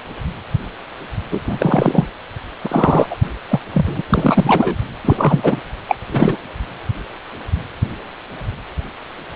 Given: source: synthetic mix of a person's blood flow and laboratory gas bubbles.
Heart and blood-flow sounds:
Doppler ultrasound of blood flow; precordium
1.31-2.07 s: bubbles
2.61-3.07 s: bubbles
3.10-3.16 s: bubbles
3.23-3.32 s: bubbles
3.50-3.59 s: bubbles
3.73-4.01 s: bubbles
4.09-4.76 s: bubbles
5.04-5.60 s: bubbles
5.88-5.96 s: bubbles
6.10-6.37 s: bubbles
From the record:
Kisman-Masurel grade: 223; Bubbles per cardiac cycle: several, 3 to 8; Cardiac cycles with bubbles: 10 to 50%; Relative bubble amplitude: loud (0.450 to 0.775); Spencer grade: 2 (many but less than half of the cardiac periods contain bubble signals, singularly or in groups); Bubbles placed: anywhere in the cardiac cycle

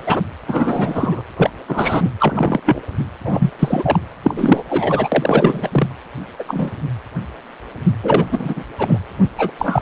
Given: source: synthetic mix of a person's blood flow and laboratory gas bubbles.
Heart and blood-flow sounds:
Doppler ultrasound of blood flow; precordium
0.06-0.21 s: bubbles
0.48-1.22 s: bubbles
1.36-1.50 s: bubbles
1.68-2.09 s: bubbles
2.19-2.59 s: bubbles
2.65-2.81 s: bubbles
3.25-3.51 s: bubbles
3.59-3.99 s: bubbles
4.24-4.63 s: bubbles
4.69-5.09 s: bubbles
5.12-5.69 s: bubbles
5.71-5.88 s: bubbles
6.39-6.43 s: bubbles
6.47-6.71 s: bubbles
8.03-8.64 s: bubbles
8.79-8.99 s: bubbles
9.38-9.51 s: bubbles
9.58-9.82 s: bubbles
From the record:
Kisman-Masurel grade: 233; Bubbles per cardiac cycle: several, 3 to 8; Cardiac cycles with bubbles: 50 to 99%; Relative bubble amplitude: loud (0.450 to 0.775); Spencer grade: 3 (all of the cardiac periods contain showers or single bubble signals, but not dominating or overriding the cardiac motion signals); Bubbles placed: anywhere in the cardiac cycle

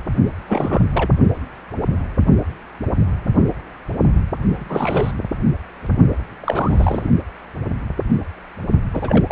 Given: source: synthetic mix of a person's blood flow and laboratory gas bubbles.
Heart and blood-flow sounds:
Doppler ultrasound of blood flow; precordium
0.48-0.81 s: bubbles
0.93-1.10 s: bubbles
4.56-5.12 s: bubbles
6.42-7.08 s: bubbles
8.93-9.32 s: bubbles
From the record:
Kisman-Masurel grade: 332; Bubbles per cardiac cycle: rolling drumbeat, 9 or more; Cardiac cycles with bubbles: 50 to 99%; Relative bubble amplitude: moderate (0.250 to 0.450); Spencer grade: 3 (all of the cardiac periods contain showers or single bubble signals, but not dominating or overriding the cardiac motion signals); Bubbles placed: only in the low amplitude regions of the cardiac cycle

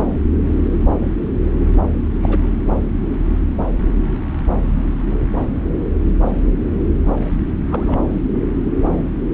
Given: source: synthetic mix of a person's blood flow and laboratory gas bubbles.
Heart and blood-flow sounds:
Doppler ultrasound of blood flow; subclavian vein
2.21-2.48 s: bubbles
7.69-7.99 s: bubbles
From the record:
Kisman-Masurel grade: 122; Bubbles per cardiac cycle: 1 to 2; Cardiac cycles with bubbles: 10 to 50%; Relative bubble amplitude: moderate (0.250 to 0.450); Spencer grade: 2 (many but less than half of the cardiac periods contain bubble signals, singularly or in groups); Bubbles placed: anywhere in the cardiac cycle

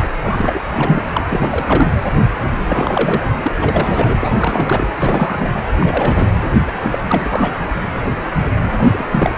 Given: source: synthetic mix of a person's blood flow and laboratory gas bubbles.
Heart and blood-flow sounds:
Doppler ultrasound of blood flow; precordium
0.22-0.61 s: bubbles
0.75-1.02 s: bubbles
1.12-1.24 s: bubbles
1.30-1.92 s: bubbles
2.69-3.30 s: bubbles
3.42-3.52 s: bubbles
3.60-4.87 s: bubbles
4.98-5.51 s: bubbles
5.75-6.28 s: bubbles
6.67-6.72 s: bubbles
6.82-6.99 s: bubbles
7.02-7.67 s: bubbles
8.76-8.91 s: bubbles
8.93-9.06 s: bubbles
9.11-9.35 s: bubbles
From the record:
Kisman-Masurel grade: 332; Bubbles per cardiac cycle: rolling drumbeat, 9 or more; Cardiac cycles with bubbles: 50 to 99%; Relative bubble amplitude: moderate (0.250 to 0.450); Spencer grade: 3 (all of the cardiac periods contain showers or single bubble signals, but not dominating or overriding the cardiac motion signals); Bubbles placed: anywhere in the cardiac cycle

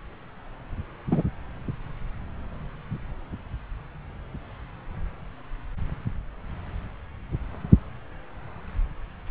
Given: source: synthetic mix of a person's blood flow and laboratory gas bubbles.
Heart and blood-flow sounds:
Doppler ultrasound of blood flow; subclavian vein
1.11-1.22 s: bubbles
From the record:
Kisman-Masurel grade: 123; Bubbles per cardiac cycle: 1 to 2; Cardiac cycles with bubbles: 10 to 50%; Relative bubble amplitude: loud (0.450 to 0.775); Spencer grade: 2 (many but less than half of the cardiac periods contain bubble signals, singularly or in groups); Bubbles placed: anywhere in the cardiac cycle

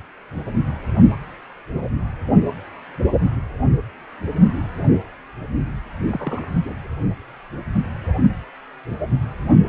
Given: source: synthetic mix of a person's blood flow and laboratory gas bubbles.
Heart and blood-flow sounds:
Doppler ultrasound of blood flow; precordium
6.06-6.50 s: bubbles
6.55-6.60 s: bubbles
6.64-6.74 s: bubbles
From the record:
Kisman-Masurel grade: 211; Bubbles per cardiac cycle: several, 3 to 8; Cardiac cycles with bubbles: 1 to 10%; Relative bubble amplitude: barely perceptible (0.100 to 0.250); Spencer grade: 1 (occasional bubble signal discernible with the cardiac motion signal, with majority of cardiac periods free of bubbles); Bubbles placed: anywhere in the cardiac cycle

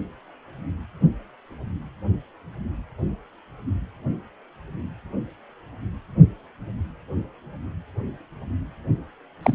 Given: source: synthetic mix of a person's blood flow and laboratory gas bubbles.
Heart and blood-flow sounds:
Doppler ultrasound of blood flow; precordium
9.43-9.55 s: bubbles
From the record:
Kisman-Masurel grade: 112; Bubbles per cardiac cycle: 1 to 2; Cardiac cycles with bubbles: 1 to 10%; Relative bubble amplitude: moderate (0.250 to 0.450); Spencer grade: 1 (occasional bubble signal discernible with the cardiac motion signal, with majority of cardiac periods free of bubbles); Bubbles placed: only in the low amplitude regions of the cardiac cycle

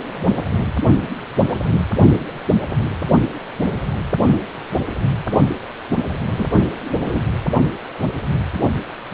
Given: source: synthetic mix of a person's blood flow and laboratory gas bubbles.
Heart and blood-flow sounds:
Doppler ultrasound of blood flow; precordium
6.37-6.47 s: bubbles
6.99-7.21 s: bubbles
From the record:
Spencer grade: 1 (occasional bubble signal discernible with the cardiac motion signal, with majority of cardiac periods free of bubbles); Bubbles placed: anywhere in the cardiac cycle

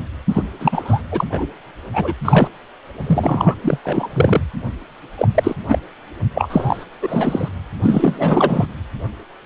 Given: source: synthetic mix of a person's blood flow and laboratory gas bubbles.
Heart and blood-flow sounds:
Doppler ultrasound of blood flow; precordium
0.29-0.46 s: bubbles
0.59-1.03 s: bubbles
1.11-1.25 s: bubbles
1.31-1.47 s: bubbles
1.94-2.14 s: bubbles
2.25-2.48 s: bubbles
3.06-3.55 s: bubbles
3.61-3.78 s: bubbles
3.85-4.09 s: bubbles
4.13-4.46 s: bubbles
5.18-5.28 s: bubbles
5.34-5.55 s: bubbles
5.68-5.79 s: bubbles
6.35-6.85 s: bubbles
7.01-7.48 s: bubbles
7.82-8.66 s: bubbles
From the record:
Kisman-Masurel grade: 343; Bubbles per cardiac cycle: rolling drumbeat, 9 or more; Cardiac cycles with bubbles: 100%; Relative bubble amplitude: loud (0.450 to 0.775); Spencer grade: 3 (all of the cardiac periods contain showers or single bubble signals, but not dominating or overriding the cardiac motion signals); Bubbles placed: anywhere in the cardiac cycle

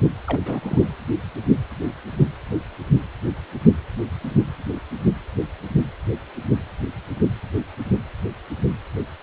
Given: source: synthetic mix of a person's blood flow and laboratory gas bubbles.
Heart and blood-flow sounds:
Doppler ultrasound of blood flow; precordium
0.27-0.95 s: bubbles
From the record:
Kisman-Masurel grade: 211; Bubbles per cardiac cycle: several, 3 to 8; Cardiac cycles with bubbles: 1 to 10%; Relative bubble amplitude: barely perceptible (0.100 to 0.250); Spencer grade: 1 (occasional bubble signal discernible with the cardiac motion signal, with majority of cardiac periods free of bubbles); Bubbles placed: anywhere in the cardiac cycle

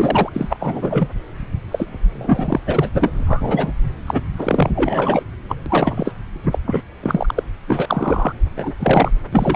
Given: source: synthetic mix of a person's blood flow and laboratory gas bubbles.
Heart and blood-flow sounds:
Doppler ultrasound of blood flow; subclavian vein
0.00-0.30 s: bubbles
0.33-0.56 s: bubbles
0.60-1.08 s: bubbles
1.71-1.86 s: bubbles
1.90-2.60 s: bubbles
2.66-2.89 s: bubbles
2.95-3.10 s: bubbles
3.14-3.72 s: bubbles
4.07-4.21 s: bubbles
4.37-4.71 s: bubbles
4.75-5.23 s: bubbles
5.49-5.56 s: bubbles
5.66-6.13 s: bubbles
6.50-6.58 s: bubbles
6.66-6.82 s: bubbles
7.02-7.43 s: bubbles
7.67-8.33 s: bubbles
8.56-8.72 s: bubbles
8.79-9.11 s: bubbles
9.33-9.56 s: bubbles
From the record:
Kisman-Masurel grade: 343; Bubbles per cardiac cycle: rolling drumbeat, 9 or more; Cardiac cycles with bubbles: 100%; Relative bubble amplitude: loud (0.450 to 0.775); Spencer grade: 3 (all of the cardiac periods contain showers or single bubble signals, but not dominating or overriding the cardiac motion signals); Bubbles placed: anywhere in the cardiac cycle

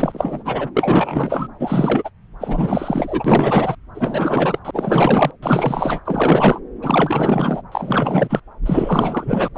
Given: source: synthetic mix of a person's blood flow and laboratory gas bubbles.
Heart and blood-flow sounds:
Doppler ultrasound of blood flow; subclavian vein
0.00-0.69 s: bubbles
0.76-1.47 s: bubbles
1.59-2.09 s: bubbles
2.39-3.75 s: bubbles
3.94-4.59 s: bubbles
4.64-5.31 s: bubbles
5.42-6.00 s: bubbles
6.05-6.59 s: bubbles
6.82-7.62 s: bubbles
7.72-8.40 s: bubbles
8.66-9.48 s: bubbles
9.55-9.58 s: bubbles
From the record:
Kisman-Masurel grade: 444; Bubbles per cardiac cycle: continuous sound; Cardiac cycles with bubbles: 100%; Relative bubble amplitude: maximal (0.775 to 0.999); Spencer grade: 4 (maximum detectable bubble signal sounding continuously throughout systole and diastole of every cardiac period, and overriding the amplitude of the normal cardiac signals); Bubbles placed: anywhere in the cardiac cycle

